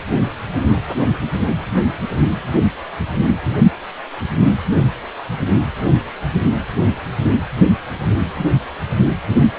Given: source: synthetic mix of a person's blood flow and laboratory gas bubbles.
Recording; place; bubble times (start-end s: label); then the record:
Doppler ultrasound of blood flow; precordium
no bubbles
From the record:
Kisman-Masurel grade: 000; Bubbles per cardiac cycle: 0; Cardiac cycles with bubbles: 0%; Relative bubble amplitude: no bubbles discernible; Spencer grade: 0 (complete lack of bubble signals)